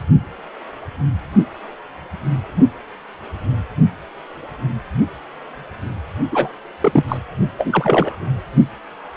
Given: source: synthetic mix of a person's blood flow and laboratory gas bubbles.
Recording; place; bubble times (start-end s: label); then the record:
Doppler ultrasound of blood flow; precordium
6.31-6.50 s: bubbles
6.82-7.04 s: bubbles
7.08-7.17 s: bubbles
7.58-8.17 s: bubbles
From the record:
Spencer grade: 2 (many but less than half of the cardiac periods contain bubble signals, singularly or in groups); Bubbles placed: anywhere in the cardiac cycle